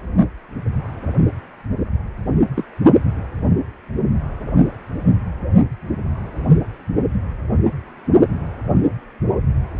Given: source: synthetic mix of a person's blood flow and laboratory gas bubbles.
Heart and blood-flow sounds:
Doppler ultrasound of blood flow; precordium
2.55-2.64 s: bubbles
From the record:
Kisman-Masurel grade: 122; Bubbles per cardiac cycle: 1 to 2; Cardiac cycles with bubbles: 10 to 50%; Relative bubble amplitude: moderate (0.250 to 0.450); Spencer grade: 2 (many but less than half of the cardiac periods contain bubble signals, singularly or in groups); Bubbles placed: only in the low amplitude regions of the cardiac cycle

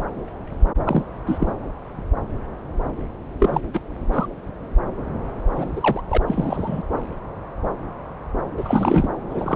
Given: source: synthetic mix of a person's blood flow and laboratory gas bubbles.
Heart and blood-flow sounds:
Doppler ultrasound of blood flow; subclavian vein
0.83-1.03 s: bubbles
1.27-1.52 s: bubbles
3.39-3.61 s: bubbles
3.73-3.80 s: bubbles
4.12-4.27 s: bubbles
5.56-6.02 s: bubbles
6.10-6.18 s: bubbles
6.27-6.82 s: bubbles
8.57-9.09 s: bubbles
9.29-9.56 s: bubbles
From the record:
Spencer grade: 2 (many but less than half of the cardiac periods contain bubble signals, singularly or in groups); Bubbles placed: anywhere in the cardiac cycle

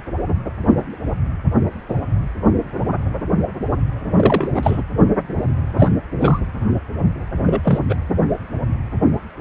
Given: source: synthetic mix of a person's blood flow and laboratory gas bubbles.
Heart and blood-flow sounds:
Doppler ultrasound of blood flow; precordium
4.16-4.83 s: bubbles
5.76-5.90 s: bubbles
6.19-6.39 s: bubbles
7.45-7.78 s: bubbles
7.89-7.96 s: bubbles
From the record:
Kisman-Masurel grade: 223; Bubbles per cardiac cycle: several, 3 to 8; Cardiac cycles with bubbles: 10 to 50%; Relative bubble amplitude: loud (0.450 to 0.775); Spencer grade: 2 (many but less than half of the cardiac periods contain bubble signals, singularly or in groups); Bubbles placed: anywhere in the cardiac cycle

